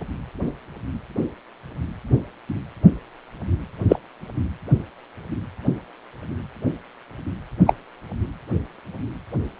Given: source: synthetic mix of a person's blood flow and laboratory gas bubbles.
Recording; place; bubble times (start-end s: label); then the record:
Doppler ultrasound of blood flow; precordium
3.89-3.96 s: bubbles
7.67-7.74 s: bubbles
From the record:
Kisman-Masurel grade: 123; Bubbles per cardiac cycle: 1 to 2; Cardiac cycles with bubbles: 10 to 50%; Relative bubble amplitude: loud (0.450 to 0.775); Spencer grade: 2 (many but less than half of the cardiac periods contain bubble signals, singularly or in groups); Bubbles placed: anywhere in the cardiac cycle